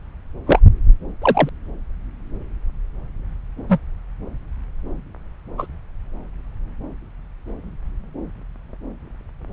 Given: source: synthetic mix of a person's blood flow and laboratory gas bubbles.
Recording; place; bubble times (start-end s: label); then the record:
Doppler ultrasound of blood flow; subclavian vein
0.47-0.59 s: bubbles
1.21-1.49 s: bubbles
3.68-3.79 s: bubbles
5.58-5.67 s: bubbles
From the record:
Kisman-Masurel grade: 123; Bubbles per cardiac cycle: 1 to 2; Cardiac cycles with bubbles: 10 to 50%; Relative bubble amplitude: loud (0.450 to 0.775); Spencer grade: 2 (many but less than half of the cardiac periods contain bubble signals, singularly or in groups); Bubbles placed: anywhere in the cardiac cycle